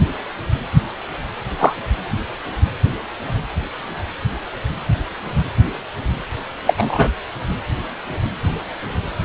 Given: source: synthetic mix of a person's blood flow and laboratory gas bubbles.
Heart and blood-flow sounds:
Doppler ultrasound of blood flow; precordium
1.59-1.74 s: bubbles
6.66-6.73 s: bubbles
6.76-7.09 s: bubbles
From the record:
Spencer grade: 2 (many but less than half of the cardiac periods contain bubble signals, singularly or in groups); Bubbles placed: anywhere in the cardiac cycle

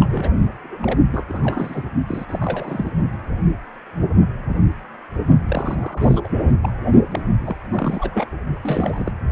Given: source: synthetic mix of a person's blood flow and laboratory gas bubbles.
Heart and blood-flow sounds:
Doppler ultrasound of blood flow; precordium
0.00-0.31 s: bubbles
0.63-0.78 s: bubbles
0.82-0.99 s: bubbles
1.11-1.25 s: bubbles
1.29-1.83 s: bubbles
2.08-2.25 s: bubbles
2.29-2.91 s: bubbles
5.46-6.21 s: bubbles
6.24-6.29 s: bubbles
6.62-6.72 s: bubbles
7.11-7.21 s: bubbles
7.46-7.56 s: bubbles
7.72-8.38 s: bubbles
8.63-9.12 s: bubbles
From the record:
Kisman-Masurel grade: 332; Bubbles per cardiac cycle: rolling drumbeat, 9 or more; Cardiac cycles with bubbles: 50 to 99%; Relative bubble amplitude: moderate (0.250 to 0.450); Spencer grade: 3 (all of the cardiac periods contain showers or single bubble signals, but not dominating or overriding the cardiac motion signals); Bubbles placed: only in the low amplitude regions of the cardiac cycle

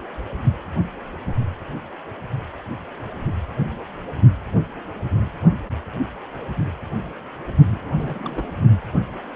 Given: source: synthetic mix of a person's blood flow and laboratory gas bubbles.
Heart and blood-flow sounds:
Doppler ultrasound of blood flow; precordium
7.68-8.52 s: bubbles
From the record:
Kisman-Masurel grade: 221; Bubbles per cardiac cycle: several, 3 to 8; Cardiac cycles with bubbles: 10 to 50%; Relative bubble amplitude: barely perceptible (0.100 to 0.250); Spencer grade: 2 (many but less than half of the cardiac periods contain bubble signals, singularly or in groups); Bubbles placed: only in the low amplitude regions of the cardiac cycle

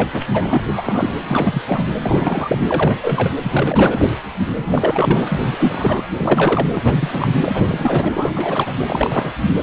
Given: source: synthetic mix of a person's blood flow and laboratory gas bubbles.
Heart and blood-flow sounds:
Doppler ultrasound of blood flow; precordium
0.00-0.10 s: bubbles
0.12-0.64 s: bubbles
0.68-1.16 s: bubbles
1.24-1.63 s: bubbles
1.67-1.83 s: bubbles
1.95-2.58 s: bubbles
2.69-3.30 s: bubbles
3.42-4.05 s: bubbles
4.50-6.03 s: bubbles
6.17-6.67 s: bubbles
6.72-7.29 s: bubbles
7.40-8.12 s: bubbles
8.14-8.33 s: bubbles
8.36-8.72 s: bubbles
8.86-9.31 s: bubbles
9.60-9.63 s: bubbles
From the record:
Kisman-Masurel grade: 343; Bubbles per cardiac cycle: rolling drumbeat, 9 or more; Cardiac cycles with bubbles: 100%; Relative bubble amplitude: loud (0.450 to 0.775); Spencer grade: 3 (all of the cardiac periods contain showers or single bubble signals, but not dominating or overriding the cardiac motion signals); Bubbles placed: anywhere in the cardiac cycle

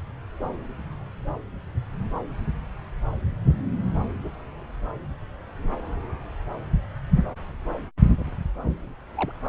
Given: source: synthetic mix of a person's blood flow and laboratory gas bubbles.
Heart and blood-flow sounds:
Doppler ultrasound of blood flow; subclavian vein
8.56-8.96 s: bubbles
9.15-9.32 s: bubbles
From the record:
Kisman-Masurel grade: 111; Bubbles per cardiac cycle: 1 to 2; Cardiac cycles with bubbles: 1 to 10%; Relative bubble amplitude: barely perceptible (0.100 to 0.250); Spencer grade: 1 (occasional bubble signal discernible with the cardiac motion signal, with majority of cardiac periods free of bubbles); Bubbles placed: anywhere in the cardiac cycle

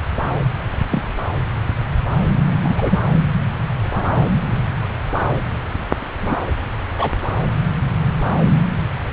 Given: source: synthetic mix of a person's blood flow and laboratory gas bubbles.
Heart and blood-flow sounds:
Doppler ultrasound of blood flow; subclavian vein
0.91-1.04 s: bubbles
2.62-3.00 s: bubbles
6.21-6.36 s: bubbles
6.97-7.12 s: bubbles
From the record:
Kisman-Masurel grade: 122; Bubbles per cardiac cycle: 1 to 2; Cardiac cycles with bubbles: 10 to 50%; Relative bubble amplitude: moderate (0.250 to 0.450); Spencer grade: 2 (many but less than half of the cardiac periods contain bubble signals, singularly or in groups); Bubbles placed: anywhere in the cardiac cycle

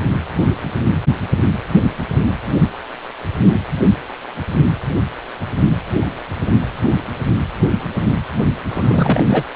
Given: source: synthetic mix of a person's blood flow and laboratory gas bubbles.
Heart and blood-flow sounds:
Doppler ultrasound of blood flow; precordium
8.71-9.44 s: bubbles
From the record:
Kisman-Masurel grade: 212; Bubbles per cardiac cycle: several, 3 to 8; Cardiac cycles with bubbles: 1 to 10%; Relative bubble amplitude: moderate (0.250 to 0.450); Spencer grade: 1 (occasional bubble signal discernible with the cardiac motion signal, with majority of cardiac periods free of bubbles); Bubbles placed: anywhere in the cardiac cycle

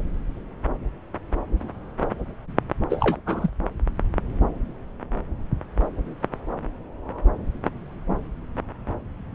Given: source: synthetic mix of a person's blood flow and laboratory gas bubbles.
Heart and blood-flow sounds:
Doppler ultrasound of blood flow; subclavian vein
2.90-3.20 s: bubbles
3.26-3.50 s: bubbles
From the record:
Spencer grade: 1 (occasional bubble signal discernible with the cardiac motion signal, with majority of cardiac periods free of bubbles); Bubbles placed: anywhere in the cardiac cycle

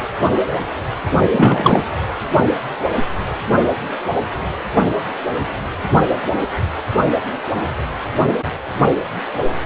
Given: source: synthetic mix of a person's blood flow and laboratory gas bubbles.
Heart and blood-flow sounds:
Doppler ultrasound of blood flow; precordium
1.31-1.83 s: bubbles
From the record:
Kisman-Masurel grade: 213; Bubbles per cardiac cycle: several, 3 to 8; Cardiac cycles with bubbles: 1 to 10%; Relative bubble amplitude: loud (0.450 to 0.775); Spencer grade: 1 (occasional bubble signal discernible with the cardiac motion signal, with majority of cardiac periods free of bubbles); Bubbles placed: anywhere in the cardiac cycle

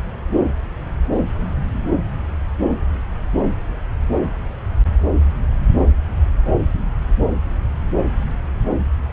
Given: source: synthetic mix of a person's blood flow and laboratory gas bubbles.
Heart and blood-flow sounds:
Doppler ultrasound of blood flow; subclavian vein
no bubbles
From the record:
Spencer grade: 0 (complete lack of bubble signals)

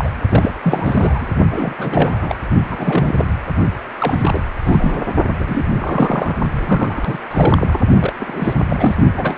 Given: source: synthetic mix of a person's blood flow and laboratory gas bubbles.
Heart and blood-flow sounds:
Doppler ultrasound of blood flow; precordium
0.00-0.10 s: bubbles
0.30-0.52 s: bubbles
0.63-1.27 s: bubbles
1.51-1.74 s: bubbles
1.78-2.36 s: bubbles
2.70-3.30 s: bubbles
3.98-4.41 s: bubbles
4.65-5.08 s: bubbles
5.39-5.65 s: bubbles
5.75-6.36 s: bubbles
6.59-7.18 s: bubbles
7.31-7.81 s: bubbles
8.00-8.13 s: bubbles
8.20-8.54 s: bubbles
8.67-8.96 s: bubbles
9.17-9.36 s: bubbles
From the record:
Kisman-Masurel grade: 342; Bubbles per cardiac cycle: rolling drumbeat, 9 or more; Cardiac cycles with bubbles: 100%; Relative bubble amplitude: moderate (0.250 to 0.450); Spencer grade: 3 (all of the cardiac periods contain showers or single bubble signals, but not dominating or overriding the cardiac motion signals); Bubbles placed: only in the low amplitude regions of the cardiac cycle

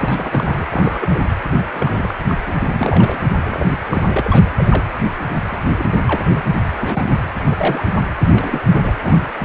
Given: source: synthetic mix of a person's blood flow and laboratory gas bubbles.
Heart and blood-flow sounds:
Doppler ultrasound of blood flow; precordium
0.00-0.65 s: bubbles
0.70-1.20 s: bubbles
1.74-2.14 s: bubbles
2.27-2.35 s: bubbles
2.46-2.52 s: bubbles
2.59-2.75 s: bubbles
2.79-3.20 s: bubbles
3.42-3.77 s: bubbles
3.88-4.21 s: bubbles
4.24-4.50 s: bubbles
4.57-4.84 s: bubbles
5.35-5.42 s: bubbles
5.50-5.70 s: bubbles
5.79-5.85 s: bubbles
6.08-6.41 s: bubbles
6.79-7.10 s: bubbles
7.51-7.83 s: bubbles
8.32-8.60 s: bubbles
8.75-8.93 s: bubbles
9.04-9.26 s: bubbles
9.39-9.44 s: bubbles
From the record:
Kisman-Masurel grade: 232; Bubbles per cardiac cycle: several, 3 to 8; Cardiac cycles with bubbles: 50 to 99%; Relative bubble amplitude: moderate (0.250 to 0.450); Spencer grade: 3 (all of the cardiac periods contain showers or single bubble signals, but not dominating or overriding the cardiac motion signals); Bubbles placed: anywhere in the cardiac cycle

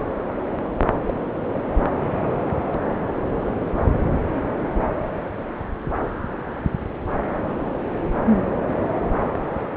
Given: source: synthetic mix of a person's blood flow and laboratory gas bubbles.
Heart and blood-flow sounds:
Doppler ultrasound of blood flow; subclavian vein
1.07-1.14 s: bubbles
From the record:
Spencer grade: 1 (occasional bubble signal discernible with the cardiac motion signal, with majority of cardiac periods free of bubbles); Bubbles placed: anywhere in the cardiac cycle

